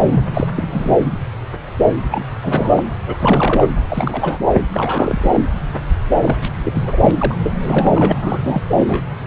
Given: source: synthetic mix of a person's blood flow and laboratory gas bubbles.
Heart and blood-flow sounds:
Doppler ultrasound of blood flow; subclavian vein
0.01-0.24 s: bubbles
0.33-0.47 s: bubbles
0.55-0.67 s: bubbles
0.71-1.04 s: bubbles
2.11-2.24 s: bubbles
2.43-2.83 s: bubbles
3.06-3.17 s: bubbles
3.19-3.68 s: bubbles
3.88-4.39 s: bubbles
4.48-4.52 s: bubbles
4.71-5.46 s: bubbles
6.20-6.36 s: bubbles
6.42-6.50 s: bubbles
6.63-6.97 s: bubbles
7.00-7.11 s: bubbles
7.19-7.36 s: bubbles
7.43-7.54 s: bubbles
7.62-8.12 s: bubbles
8.21-8.39 s: bubbles
8.43-8.62 s: bubbles
8.74-9.03 s: bubbles
From the record:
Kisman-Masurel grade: 332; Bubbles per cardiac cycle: rolling drumbeat, 9 or more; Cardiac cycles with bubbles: 50 to 99%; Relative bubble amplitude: moderate (0.250 to 0.450); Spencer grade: 3 (all of the cardiac periods contain showers or single bubble signals, but not dominating or overriding the cardiac motion signals); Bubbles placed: anywhere in the cardiac cycle

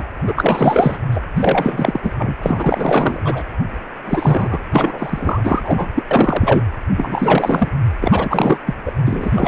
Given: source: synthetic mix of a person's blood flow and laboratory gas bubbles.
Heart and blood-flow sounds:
Doppler ultrasound of blood flow; precordium
0.00-0.03 s: bubbles
0.27-0.98 s: bubbles
1.10-1.20 s: bubbles
1.36-2.12 s: bubbles
2.17-2.35 s: bubbles
2.42-3.44 s: bubbles
4.06-4.63 s: bubbles
4.71-5.88 s: bubbles
5.94-6.04 s: bubbles
6.11-6.62 s: bubbles
6.96-7.69 s: bubbles
8.01-8.57 s: bubbles
8.66-8.74 s: bubbles
8.85-8.92 s: bubbles
9.06-9.48 s: bubbles
From the record:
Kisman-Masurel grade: 444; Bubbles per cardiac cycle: continuous sound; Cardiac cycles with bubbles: 100%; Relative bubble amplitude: maximal (0.775 to 0.999); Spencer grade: 4 (maximum detectable bubble signal sounding continuously throughout systole and diastole of every cardiac period, and overriding the amplitude of the normal cardiac signals); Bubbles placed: anywhere in the cardiac cycle

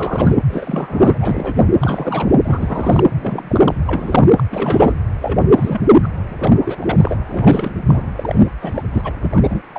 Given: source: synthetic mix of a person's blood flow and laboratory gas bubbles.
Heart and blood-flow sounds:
Doppler ultrasound of blood flow; precordium
0.00-0.36 s: bubbles
0.49-1.18 s: bubbles
1.20-1.69 s: bubbles
1.80-2.35 s: bubbles
2.43-3.04 s: bubbles
3.15-3.76 s: bubbles
3.85-4.29 s: bubbles
4.36-4.43 s: bubbles
4.50-4.96 s: bubbles
5.21-5.41 s: bubbles
5.54-5.81 s: bubbles
5.90-6.09 s: bubbles
6.26-6.76 s: bubbles
6.79-7.17 s: bubbles
7.30-7.71 s: bubbles
7.88-8.06 s: bubbles
8.17-8.47 s: bubbles
8.60-8.82 s: bubbles
8.93-9.14 s: bubbles
9.22-9.62 s: bubbles
9.72-9.78 s: bubbles
From the record:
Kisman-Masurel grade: 332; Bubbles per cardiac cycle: rolling drumbeat, 9 or more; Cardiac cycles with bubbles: 50 to 99%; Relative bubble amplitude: moderate (0.250 to 0.450); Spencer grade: 3 (all of the cardiac periods contain showers or single bubble signals, but not dominating or overriding the cardiac motion signals); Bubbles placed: anywhere in the cardiac cycle

